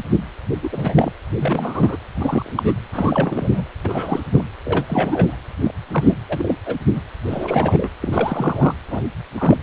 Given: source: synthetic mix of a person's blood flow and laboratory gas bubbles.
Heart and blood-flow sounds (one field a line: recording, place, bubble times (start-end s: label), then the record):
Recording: Doppler ultrasound of blood flow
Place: precordium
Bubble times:
0.62-0.70 s: bubbles
0.72-1.12 s: bubbles
1.39-1.96 s: bubbles
2.14-2.73 s: bubbles
2.92-3.65 s: bubbles
3.84-4.28 s: bubbles
4.31-4.44 s: bubbles
4.65-4.86 s: bubbles
4.89-5.37 s: bubbles
5.61-5.74 s: bubbles
5.92-6.15 s: bubbles
6.29-6.55 s: bubbles
6.66-6.77 s: bubbles
6.93-7.02 s: bubbles
7.26-7.90 s: bubbles
8.01-8.73 s: bubbles
8.88-9.03 s: bubbles
9.38-9.57 s: bubbles
From the record:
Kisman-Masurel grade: 232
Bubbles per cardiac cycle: several, 3 to 8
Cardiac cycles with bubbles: 50 to 99%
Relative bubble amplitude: moderate (0.250 to 0.450)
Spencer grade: 3 (all of the cardiac periods contain showers or single bubble signals, but not dominating or overriding the cardiac motion signals)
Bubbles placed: anywhere in the cardiac cycle